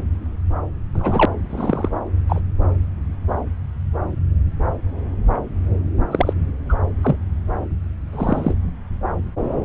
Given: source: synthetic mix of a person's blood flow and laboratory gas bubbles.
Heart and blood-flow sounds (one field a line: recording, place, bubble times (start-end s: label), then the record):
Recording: Doppler ultrasound of blood flow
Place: subclavian vein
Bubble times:
0.94-1.26 s: bubbles
1.50-1.89 s: bubbles
2.29-2.41 s: bubbles
6.11-6.33 s: bubbles
6.69-6.75 s: bubbles
7.02-7.16 s: bubbles
8.12-8.54 s: bubbles
From the record:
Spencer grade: 2 (many but less than half of the cardiac periods contain bubble signals, singularly or in groups)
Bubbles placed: anywhere in the cardiac cycle